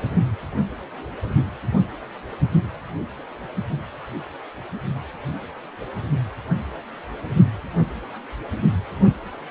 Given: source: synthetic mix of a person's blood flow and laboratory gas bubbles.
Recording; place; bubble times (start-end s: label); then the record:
Doppler ultrasound of blood flow; precordium
no bubbles
From the record:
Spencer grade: 0 (complete lack of bubble signals)